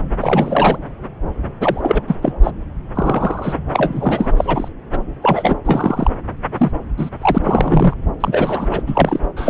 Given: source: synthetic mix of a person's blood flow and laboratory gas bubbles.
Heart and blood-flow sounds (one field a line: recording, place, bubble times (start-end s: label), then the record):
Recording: Doppler ultrasound of blood flow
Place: subclavian vein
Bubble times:
0.20-0.78 s: bubbles
1.60-2.03 s: bubbles
2.08-2.15 s: bubbles
2.22-2.33 s: bubbles
2.43-2.51 s: bubbles
2.94-3.54 s: bubbles
3.73-4.32 s: bubbles
4.36-4.68 s: bubbles
4.92-4.99 s: bubbles
5.22-5.55 s: bubbles
5.65-6.11 s: bubbles
6.58-6.72 s: bubbles
6.97-7.10 s: bubbles
7.22-7.39 s: bubbles
7.43-7.94 s: bubbles
8.20-8.67 s: bubbles
8.71-8.82 s: bubbles
8.87-9.20 s: bubbles
9.36-9.49 s: bubbles
From the record:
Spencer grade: 3 (all of the cardiac periods contain showers or single bubble signals, but not dominating or overriding the cardiac motion signals)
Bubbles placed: anywhere in the cardiac cycle